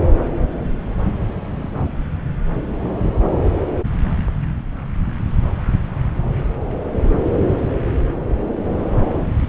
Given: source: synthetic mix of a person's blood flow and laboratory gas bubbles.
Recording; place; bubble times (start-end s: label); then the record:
Doppler ultrasound of blood flow; subclavian vein
1.59-1.70 s: bubbles
From the record:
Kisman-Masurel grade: 111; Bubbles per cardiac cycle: 1 to 2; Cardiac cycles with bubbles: 1 to 10%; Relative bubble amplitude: barely perceptible (0.100 to 0.250); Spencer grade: 1 (occasional bubble signal discernible with the cardiac motion signal, with majority of cardiac periods free of bubbles); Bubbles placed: anywhere in the cardiac cycle